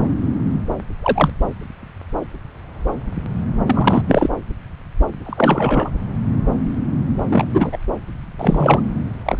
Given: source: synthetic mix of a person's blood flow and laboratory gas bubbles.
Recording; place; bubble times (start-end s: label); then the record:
Doppler ultrasound of blood flow; subclavian vein
1.03-1.30 s: bubbles
3.67-4.03 s: bubbles
4.07-4.28 s: bubbles
5.25-5.91 s: bubbles
7.29-7.45 s: bubbles
7.53-7.78 s: bubbles
8.38-8.81 s: bubbles
9.25-9.38 s: bubbles
From the record:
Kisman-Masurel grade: 223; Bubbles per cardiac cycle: several, 3 to 8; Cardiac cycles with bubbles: 10 to 50%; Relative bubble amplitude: loud (0.450 to 0.775); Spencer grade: 2 (many but less than half of the cardiac periods contain bubble signals, singularly or in groups); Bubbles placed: anywhere in the cardiac cycle